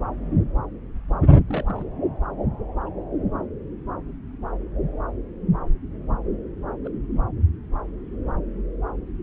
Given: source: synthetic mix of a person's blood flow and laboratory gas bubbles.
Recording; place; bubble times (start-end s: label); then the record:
Doppler ultrasound of blood flow; subclavian vein
1.48-1.85 s: bubbles
2.86-2.89 s: bubbles
6.84-6.89 s: bubbles
From the record:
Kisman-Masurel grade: 121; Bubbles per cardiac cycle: 1 to 2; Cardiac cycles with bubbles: 10 to 50%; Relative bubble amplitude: barely perceptible (0.100 to 0.250); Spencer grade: 2 (many but less than half of the cardiac periods contain bubble signals, singularly or in groups); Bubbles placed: anywhere in the cardiac cycle